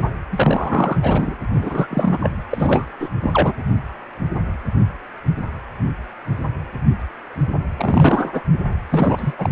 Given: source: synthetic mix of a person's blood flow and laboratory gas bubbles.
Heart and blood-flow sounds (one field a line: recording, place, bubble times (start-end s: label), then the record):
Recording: Doppler ultrasound of blood flow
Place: precordium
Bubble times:
0.31-1.35 s: bubbles
1.54-1.87 s: bubbles
1.90-2.18 s: bubbles
2.20-2.31 s: bubbles
2.51-2.85 s: bubbles
3.00-3.09 s: bubbles
3.23-3.53 s: bubbles
7.77-8.42 s: bubbles
8.53-8.58 s: bubbles
8.90-9.32 s: bubbles
9.38-9.50 s: bubbles
From the record:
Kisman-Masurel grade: 333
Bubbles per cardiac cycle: rolling drumbeat, 9 or more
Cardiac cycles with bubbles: 50 to 99%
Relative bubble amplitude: loud (0.450 to 0.775)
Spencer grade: 3 (all of the cardiac periods contain showers or single bubble signals, but not dominating or overriding the cardiac motion signals)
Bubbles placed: anywhere in the cardiac cycle